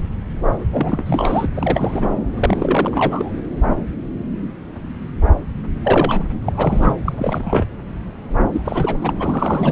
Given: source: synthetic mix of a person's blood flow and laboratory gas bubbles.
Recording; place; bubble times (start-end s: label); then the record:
Doppler ultrasound of blood flow; subclavian vein
0.72-1.46 s: bubbles
1.57-2.08 s: bubbles
2.38-3.31 s: bubbles
5.83-6.24 s: bubbles
6.42-6.92 s: bubbles
7.04-7.65 s: bubbles
8.53-8.62 s: bubbles
8.64-8.97 s: bubbles
9.02-9.13 s: bubbles
9.19-9.72 s: bubbles
From the record:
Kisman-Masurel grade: 332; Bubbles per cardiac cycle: rolling drumbeat, 9 or more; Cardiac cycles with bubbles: 50 to 99%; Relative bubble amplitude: moderate (0.250 to 0.450); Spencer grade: 3 (all of the cardiac periods contain showers or single bubble signals, but not dominating or overriding the cardiac motion signals); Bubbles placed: anywhere in the cardiac cycle